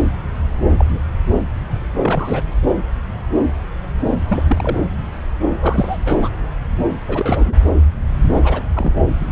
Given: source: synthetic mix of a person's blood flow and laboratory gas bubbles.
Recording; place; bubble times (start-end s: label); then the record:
Doppler ultrasound of blood flow; subclavian vein
0.66-0.99 s: bubbles
2.02-2.42 s: bubbles
4.27-4.79 s: bubbles
5.61-5.97 s: bubbles
6.05-6.29 s: bubbles
7.08-7.54 s: bubbles
8.34-8.62 s: bubbles
8.75-8.92 s: bubbles
From the record:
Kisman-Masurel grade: 222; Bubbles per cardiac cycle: several, 3 to 8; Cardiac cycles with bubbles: 10 to 50%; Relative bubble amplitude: moderate (0.250 to 0.450); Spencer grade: 2 (many but less than half of the cardiac periods contain bubble signals, singularly or in groups); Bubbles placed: anywhere in the cardiac cycle